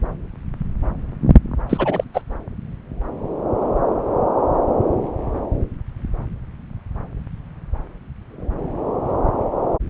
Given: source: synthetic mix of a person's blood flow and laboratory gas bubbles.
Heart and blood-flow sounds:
Doppler ultrasound of blood flow; subclavian vein
1.69-2.04 s: bubbles
2.13-2.21 s: bubbles
From the record:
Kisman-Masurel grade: 213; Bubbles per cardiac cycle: several, 3 to 8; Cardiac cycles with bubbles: 1 to 10%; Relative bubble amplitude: loud (0.450 to 0.775); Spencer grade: 1 (occasional bubble signal discernible with the cardiac motion signal, with majority of cardiac periods free of bubbles); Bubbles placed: anywhere in the cardiac cycle

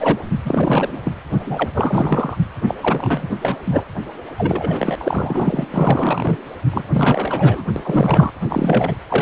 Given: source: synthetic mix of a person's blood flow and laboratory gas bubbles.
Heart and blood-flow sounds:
Doppler ultrasound of blood flow; precordium
0.00-0.24 s: bubbles
0.45-1.12 s: bubbles
1.39-1.68 s: bubbles
1.74-2.37 s: bubbles
2.68-2.75 s: bubbles
2.82-3.29 s: bubbles
3.41-3.56 s: bubbles
3.65-3.84 s: bubbles
4.38-4.96 s: bubbles
5.00-5.65 s: bubbles
5.72-6.36 s: bubbles
6.71-6.82 s: bubbles
6.92-7.65 s: bubbles
7.76-8.30 s: bubbles
8.49-8.96 s: bubbles
9.08-9.22 s: bubbles
From the record:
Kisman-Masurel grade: 343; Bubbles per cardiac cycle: rolling drumbeat, 9 or more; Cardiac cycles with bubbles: 100%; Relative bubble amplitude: loud (0.450 to 0.775); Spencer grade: 3 (all of the cardiac periods contain showers or single bubble signals, but not dominating or overriding the cardiac motion signals); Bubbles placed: anywhere in the cardiac cycle

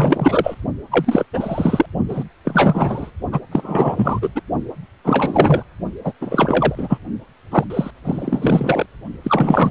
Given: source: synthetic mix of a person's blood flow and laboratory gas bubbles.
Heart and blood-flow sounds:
Doppler ultrasound of blood flow; precordium
0.00-0.55 s: bubbles
0.91-1.26 s: bubbles
1.33-1.86 s: bubbles
2.08-2.24 s: bubbles
2.44-3.11 s: bubbles
3.31-3.40 s: bubbles
3.51-4.29 s: bubbles
4.35-4.41 s: bubbles
5.04-5.62 s: bubbles
6.04-6.12 s: bubbles
6.21-6.98 s: bubbles
7.52-7.65 s: bubbles
7.70-7.91 s: bubbles
8.04-8.86 s: bubbles
9.23-9.71 s: bubbles
From the record:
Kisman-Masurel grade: 343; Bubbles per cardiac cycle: rolling drumbeat, 9 or more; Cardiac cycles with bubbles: 100%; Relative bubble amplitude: loud (0.450 to 0.775); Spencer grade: 3 (all of the cardiac periods contain showers or single bubble signals, but not dominating or overriding the cardiac motion signals); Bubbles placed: only in the low amplitude regions of the cardiac cycle

